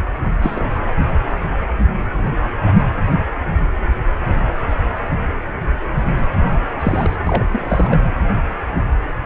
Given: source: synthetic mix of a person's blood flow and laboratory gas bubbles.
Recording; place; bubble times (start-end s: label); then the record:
Doppler ultrasound of blood flow; precordium
0.23-0.31 s: bubbles
0.33-0.79 s: bubbles
6.79-7.16 s: bubbles
7.27-7.45 s: bubbles
7.51-8.01 s: bubbles
From the record:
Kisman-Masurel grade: 222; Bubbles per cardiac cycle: several, 3 to 8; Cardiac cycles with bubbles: 10 to 50%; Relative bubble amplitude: moderate (0.250 to 0.450); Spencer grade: 2 (many but less than half of the cardiac periods contain bubble signals, singularly or in groups); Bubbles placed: anywhere in the cardiac cycle